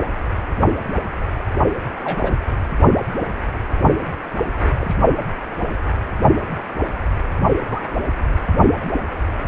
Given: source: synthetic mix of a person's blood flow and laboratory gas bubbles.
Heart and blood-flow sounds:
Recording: Doppler ultrasound of blood flow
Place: precordium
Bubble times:
2.03-2.41 s: bubbles
4.59-4.71 s: bubbles
4.79-4.96 s: bubbles
7.68-7.80 s: bubbles
From the record:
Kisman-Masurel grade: 121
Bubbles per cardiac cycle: 1 to 2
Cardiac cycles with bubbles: 10 to 50%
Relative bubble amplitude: barely perceptible (0.100 to 0.250)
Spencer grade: 2 (many but less than half of the cardiac periods contain bubble signals, singularly or in groups)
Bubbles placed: only in the low amplitude regions of the cardiac cycle

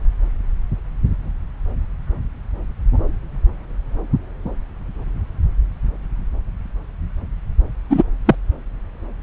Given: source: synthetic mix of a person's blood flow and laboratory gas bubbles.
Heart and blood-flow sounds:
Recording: Doppler ultrasound of blood flow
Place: subclavian vein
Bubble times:
7.89-8.04 s: bubbles
8.25-8.36 s: bubbles
From the record:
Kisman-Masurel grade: 113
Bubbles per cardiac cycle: 1 to 2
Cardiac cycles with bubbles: 1 to 10%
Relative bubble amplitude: loud (0.450 to 0.775)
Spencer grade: 1 (occasional bubble signal discernible with the cardiac motion signal, with majority of cardiac periods free of bubbles)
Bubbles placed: anywhere in the cardiac cycle

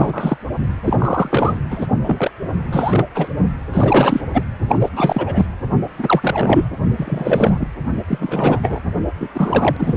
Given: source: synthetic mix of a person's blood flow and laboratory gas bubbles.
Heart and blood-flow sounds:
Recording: Doppler ultrasound of blood flow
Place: precordium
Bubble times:
0.00-0.37 s: bubbles
0.84-1.58 s: bubbles
1.71-1.89 s: bubbles
2.04-2.31 s: bubbles
2.71-3.05 s: bubbles
3.15-3.32 s: bubbles
3.72-4.21 s: bubbles
4.33-4.43 s: bubbles
4.67-4.91 s: bubbles
4.96-5.46 s: bubbles
5.98-6.69 s: bubbles
6.96-7.67 s: bubbles
8.07-8.60 s: bubbles
8.62-8.80 s: bubbles
9.20-9.29 s: bubbles
9.34-9.96 s: bubbles
From the record:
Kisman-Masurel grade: 343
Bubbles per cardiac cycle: rolling drumbeat, 9 or more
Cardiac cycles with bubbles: 100%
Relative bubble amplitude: loud (0.450 to 0.775)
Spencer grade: 3 (all of the cardiac periods contain showers or single bubble signals, but not dominating or overriding the cardiac motion signals)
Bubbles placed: only in the low amplitude regions of the cardiac cycle

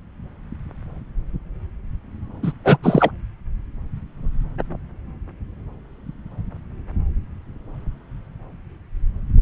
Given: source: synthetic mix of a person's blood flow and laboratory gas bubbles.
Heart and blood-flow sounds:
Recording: Doppler ultrasound of blood flow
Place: subclavian vein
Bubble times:
2.43-2.52 s: bubbles
2.65-2.77 s: bubbles
2.83-3.11 s: bubbles
From the record:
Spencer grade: 1 (occasional bubble signal discernible with the cardiac motion signal, with majority of cardiac periods free of bubbles)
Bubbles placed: anywhere in the cardiac cycle

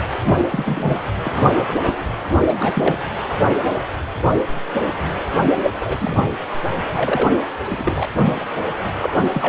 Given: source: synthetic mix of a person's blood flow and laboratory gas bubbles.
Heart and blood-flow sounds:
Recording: Doppler ultrasound of blood flow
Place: precordium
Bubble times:
0.22-0.96 s: bubbles
1.23-1.95 s: bubbles
2.23-2.35 s: bubbles
2.48-2.96 s: bubbles
5.63-5.71 s: bubbles
5.74-6.24 s: bubbles
6.95-7.31 s: bubbles
7.63-8.07 s: bubbles
8.22-8.45 s: bubbles
9.00-9.16 s: bubbles
9.19-9.29 s: bubbles
9.33-9.49 s: bubbles
From the record:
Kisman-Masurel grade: 232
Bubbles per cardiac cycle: several, 3 to 8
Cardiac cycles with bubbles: 50 to 99%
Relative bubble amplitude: moderate (0.250 to 0.450)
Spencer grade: 3 (all of the cardiac periods contain showers or single bubble signals, but not dominating or overriding the cardiac motion signals)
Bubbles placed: anywhere in the cardiac cycle

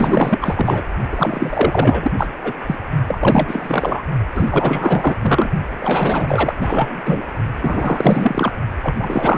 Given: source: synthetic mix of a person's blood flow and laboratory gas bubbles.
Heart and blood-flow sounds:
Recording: Doppler ultrasound of blood flow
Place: precordium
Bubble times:
0.00-0.82 s: bubbles
1.09-2.11 s: bubbles
2.17-2.27 s: bubbles
2.44-2.53 s: bubbles
2.66-2.75 s: bubbles
3.06-4.05 s: bubbles
4.34-5.16 s: bubbles
5.22-5.49 s: bubbles
5.80-6.54 s: bubbles
6.61-7.25 s: bubbles
7.62-8.52 s: bubbles
8.81-9.38 s: bubbles
From the record:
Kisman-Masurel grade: 444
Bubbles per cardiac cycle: continuous sound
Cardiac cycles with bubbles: 100%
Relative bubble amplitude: maximal (0.775 to 0.999)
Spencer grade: 4 (maximum detectable bubble signal sounding continuously throughout systole and diastole of every cardiac period, and overriding the amplitude of the normal cardiac signals)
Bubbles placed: only in the low amplitude regions of the cardiac cycle

